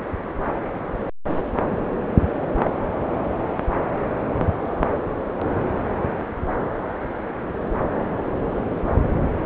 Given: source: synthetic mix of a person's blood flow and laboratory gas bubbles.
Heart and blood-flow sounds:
Doppler ultrasound of blood flow; subclavian vein
2.62-2.71 s: bubbles
From the record:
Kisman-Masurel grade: 112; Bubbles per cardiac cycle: 1 to 2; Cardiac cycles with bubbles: 1 to 10%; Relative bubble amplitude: moderate (0.250 to 0.450); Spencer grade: 1 (occasional bubble signal discernible with the cardiac motion signal, with majority of cardiac periods free of bubbles); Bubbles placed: anywhere in the cardiac cycle

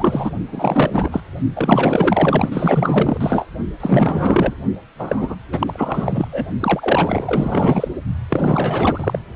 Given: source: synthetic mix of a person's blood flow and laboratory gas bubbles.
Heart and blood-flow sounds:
Doppler ultrasound of blood flow; precordium
0.00-0.31 s: bubbles
0.52-1.21 s: bubbles
1.55-3.17 s: bubbles
3.21-3.45 s: bubbles
3.80-4.55 s: bubbles
4.99-5.35 s: bubbles
5.51-6.28 s: bubbles
6.32-6.45 s: bubbles
6.60-7.88 s: bubbles
8.29-9.19 s: bubbles
From the record:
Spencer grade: 4 (maximum detectable bubble signal sounding continuously throughout systole and diastole of every cardiac period, and overriding the amplitude of the normal cardiac signals); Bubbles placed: only in the low amplitude regions of the cardiac cycle

